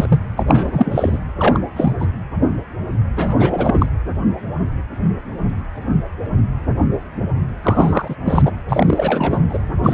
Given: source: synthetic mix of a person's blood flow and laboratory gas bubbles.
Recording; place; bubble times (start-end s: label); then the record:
Doppler ultrasound of blood flow; precordium
0.00-0.19 s: bubbles
0.36-0.43 s: bubbles
0.46-1.19 s: bubbles
1.39-1.58 s: bubbles
1.76-1.93 s: bubbles
1.99-2.08 s: bubbles
3.16-3.86 s: bubbles
7.62-8.15 s: bubbles
8.25-8.52 s: bubbles
8.69-9.40 s: bubbles
9.49-9.59 s: bubbles
9.83-9.94 s: bubbles
From the record:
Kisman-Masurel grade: 333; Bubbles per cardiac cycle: rolling drumbeat, 9 or more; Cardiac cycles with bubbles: 50 to 99%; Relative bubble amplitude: loud (0.450 to 0.775); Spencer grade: 3 (all of the cardiac periods contain showers or single bubble signals, but not dominating or overriding the cardiac motion signals); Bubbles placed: anywhere in the cardiac cycle